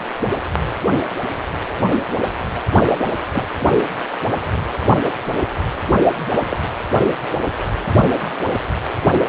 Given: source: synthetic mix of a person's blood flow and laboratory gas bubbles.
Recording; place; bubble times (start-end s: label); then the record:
Doppler ultrasound of blood flow; precordium
3.33-3.46 s: bubbles
6.49-6.57 s: bubbles
From the record:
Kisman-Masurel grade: 122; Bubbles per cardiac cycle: 1 to 2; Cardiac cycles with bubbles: 10 to 50%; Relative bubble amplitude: moderate (0.250 to 0.450); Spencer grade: 2 (many but less than half of the cardiac periods contain bubble signals, singularly or in groups); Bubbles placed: only in the low amplitude regions of the cardiac cycle